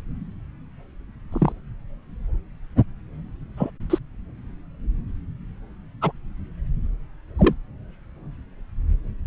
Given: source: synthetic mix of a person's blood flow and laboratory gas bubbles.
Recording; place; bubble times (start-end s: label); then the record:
Doppler ultrasound of blood flow; subclavian vein
1.32-1.52 s: bubbles
3.57-3.71 s: bubbles
3.90-3.99 s: bubbles
6.01-6.12 s: bubbles
7.38-7.54 s: bubbles
From the record:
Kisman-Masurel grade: 122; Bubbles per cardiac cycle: 1 to 2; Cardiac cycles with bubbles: 10 to 50%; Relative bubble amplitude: moderate (0.250 to 0.450); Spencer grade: 2 (many but less than half of the cardiac periods contain bubble signals, singularly or in groups); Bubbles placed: anywhere in the cardiac cycle